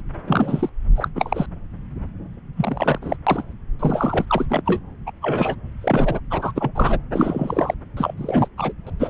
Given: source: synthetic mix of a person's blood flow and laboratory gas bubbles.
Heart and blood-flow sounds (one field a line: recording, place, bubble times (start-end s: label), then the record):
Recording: Doppler ultrasound of blood flow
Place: subclavian vein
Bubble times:
0.26-0.70 s: bubbles
0.96-1.08 s: bubbles
1.15-1.46 s: bubbles
2.56-2.98 s: bubbles
3.02-3.17 s: bubbles
3.27-3.42 s: bubbles
3.79-4.25 s: bubbles
4.28-4.46 s: bubbles
4.49-4.62 s: bubbles
4.65-4.81 s: bubbles
5.06-5.11 s: bubbles
5.21-5.55 s: bubbles
5.81-6.19 s: bubbles
6.30-6.52 s: bubbles
6.55-6.71 s: bubbles
6.75-6.98 s: bubbles
7.13-7.74 s: bubbles
7.96-8.14 s: bubbles
8.18-8.48 s: bubbles
8.58-8.73 s: bubbles
8.87-8.90 s: bubbles
9.00-9.10 s: bubbles
From the record:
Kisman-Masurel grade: 232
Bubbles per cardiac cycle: several, 3 to 8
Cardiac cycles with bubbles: 50 to 99%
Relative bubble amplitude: moderate (0.250 to 0.450)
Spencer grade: 3 (all of the cardiac periods contain showers or single bubble signals, but not dominating or overriding the cardiac motion signals)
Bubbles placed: anywhere in the cardiac cycle